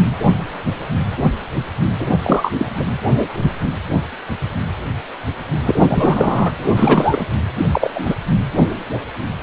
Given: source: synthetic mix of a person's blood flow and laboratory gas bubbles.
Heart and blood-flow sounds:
Doppler ultrasound of blood flow; precordium
1.99-2.08 s: bubbles
2.23-2.50 s: bubbles
2.58-2.68 s: bubbles
2.79-2.83 s: bubbles
5.65-6.52 s: bubbles
6.58-7.24 s: bubbles
7.71-8.15 s: bubbles
From the record:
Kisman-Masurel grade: 223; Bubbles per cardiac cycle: several, 3 to 8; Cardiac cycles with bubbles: 10 to 50%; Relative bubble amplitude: loud (0.450 to 0.775); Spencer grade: 2 (many but less than half of the cardiac periods contain bubble signals, singularly or in groups); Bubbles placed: anywhere in the cardiac cycle

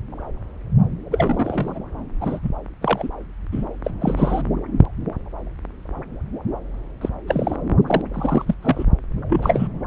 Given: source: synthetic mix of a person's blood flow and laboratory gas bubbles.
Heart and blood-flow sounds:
Doppler ultrasound of blood flow; subclavian vein
1.10-1.79 s: bubbles
2.20-2.40 s: bubbles
2.42-2.50 s: bubbles
2.81-3.09 s: bubbles
3.52-3.63 s: bubbles
3.84-3.90 s: bubbles
4.01-4.42 s: bubbles
7.01-7.09 s: bubbles
7.28-7.56 s: bubbles
7.87-8.01 s: bubbles
8.13-8.54 s: bubbles
8.62-8.85 s: bubbles
9.29-9.67 s: bubbles
From the record:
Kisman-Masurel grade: 232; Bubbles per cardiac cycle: several, 3 to 8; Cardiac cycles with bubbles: 50 to 99%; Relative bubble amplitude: moderate (0.250 to 0.450); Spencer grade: 3 (all of the cardiac periods contain showers or single bubble signals, but not dominating or overriding the cardiac motion signals); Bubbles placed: anywhere in the cardiac cycle

